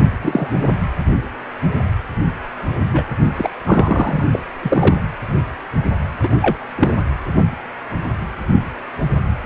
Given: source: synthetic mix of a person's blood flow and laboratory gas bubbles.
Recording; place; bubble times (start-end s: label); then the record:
Doppler ultrasound of blood flow; precordium
0.00-0.03 s: bubbles
0.22-0.71 s: bubbles
2.93-3.04 s: bubbles
3.38-3.50 s: bubbles
3.65-4.25 s: bubbles
4.34-4.39 s: bubbles
4.62-5.00 s: bubbles
6.22-6.29 s: bubbles
6.42-6.57 s: bubbles
6.78-6.94 s: bubbles
From the record:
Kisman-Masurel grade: 223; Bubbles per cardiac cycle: several, 3 to 8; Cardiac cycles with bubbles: 10 to 50%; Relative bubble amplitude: loud (0.450 to 0.775); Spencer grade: 2 (many but less than half of the cardiac periods contain bubble signals, singularly or in groups); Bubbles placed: anywhere in the cardiac cycle